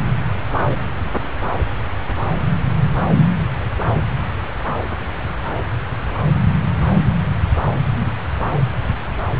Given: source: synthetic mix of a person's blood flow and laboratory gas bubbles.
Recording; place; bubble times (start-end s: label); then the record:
Doppler ultrasound of blood flow; subclavian vein
no bubbles
From the record:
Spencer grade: 0 (complete lack of bubble signals)